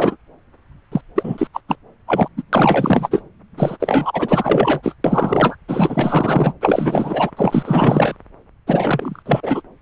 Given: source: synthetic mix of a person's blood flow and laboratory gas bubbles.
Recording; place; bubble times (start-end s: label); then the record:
Doppler ultrasound of blood flow; subclavian vein
0.00-0.17 s: bubbles
0.92-1.01 s: bubbles
1.16-1.47 s: bubbles
1.53-1.60 s: bubbles
1.69-1.75 s: bubbles
2.07-2.28 s: bubbles
2.36-2.42 s: bubbles
2.52-3.22 s: bubbles
3.57-3.77 s: bubbles
3.80-4.94 s: bubbles
5.04-5.56 s: bubbles
5.68-6.52 s: bubbles
6.61-7.31 s: bubbles
7.37-8.15 s: bubbles
8.66-9.22 s: bubbles
9.25-9.62 s: bubbles
From the record:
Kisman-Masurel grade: 444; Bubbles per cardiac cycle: continuous sound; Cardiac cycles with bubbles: 100%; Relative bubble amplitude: maximal (0.775 to 0.999); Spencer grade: 4 (maximum detectable bubble signal sounding continuously throughout systole and diastole of every cardiac period, and overriding the amplitude of the normal cardiac signals); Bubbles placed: anywhere in the cardiac cycle